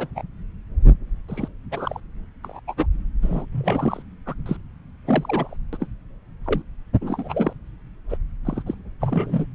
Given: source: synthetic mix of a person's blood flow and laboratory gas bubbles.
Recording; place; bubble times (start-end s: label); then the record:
Doppler ultrasound of blood flow; subclavian vein
0.00-0.07 s: bubbles
0.15-0.22 s: bubbles
1.28-1.48 s: bubbles
1.71-2.00 s: bubbles
2.44-2.60 s: bubbles
2.67-2.74 s: bubbles
2.77-2.86 s: bubbles
3.22-3.46 s: bubbles
3.52-4.02 s: bubbles
4.26-4.34 s: bubbles
4.46-4.57 s: bubbles
5.07-5.54 s: bubbles
5.73-5.77 s: bubbles
5.80-5.87 s: bubbles
6.46-6.62 s: bubbles
7.01-7.53 s: bubbles
8.09-8.17 s: bubbles
8.45-8.62 s: bubbles
8.66-8.74 s: bubbles
8.99-9.46 s: bubbles
From the record:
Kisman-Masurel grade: 242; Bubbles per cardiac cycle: several, 3 to 8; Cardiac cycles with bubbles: 100%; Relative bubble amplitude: moderate (0.250 to 0.450); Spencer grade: 3 (all of the cardiac periods contain showers or single bubble signals, but not dominating or overriding the cardiac motion signals); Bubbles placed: anywhere in the cardiac cycle